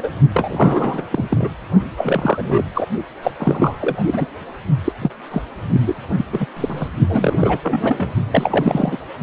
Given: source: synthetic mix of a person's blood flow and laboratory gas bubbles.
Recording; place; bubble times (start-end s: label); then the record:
Doppler ultrasound of blood flow; precordium
0.00-0.11 s: bubbles
0.34-1.04 s: bubbles
1.12-1.25 s: bubbles
1.30-1.48 s: bubbles
1.96-2.63 s: bubbles
2.74-2.86 s: bubbles
3.23-3.31 s: bubbles
3.39-4.26 s: bubbles
4.84-4.93 s: bubbles
5.02-5.10 s: bubbles
5.31-5.42 s: bubbles
5.73-5.81 s: bubbles
5.86-5.95 s: bubbles
6.17-6.25 s: bubbles
6.32-6.47 s: bubbles
6.57-6.88 s: bubbles
7.08-7.58 s: bubbles
7.62-8.13 s: bubbles
8.31-8.97 s: bubbles
From the record:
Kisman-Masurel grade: 343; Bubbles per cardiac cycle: rolling drumbeat, 9 or more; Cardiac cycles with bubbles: 100%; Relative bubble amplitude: loud (0.450 to 0.775); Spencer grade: 3 (all of the cardiac periods contain showers or single bubble signals, but not dominating or overriding the cardiac motion signals); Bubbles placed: only in the low amplitude regions of the cardiac cycle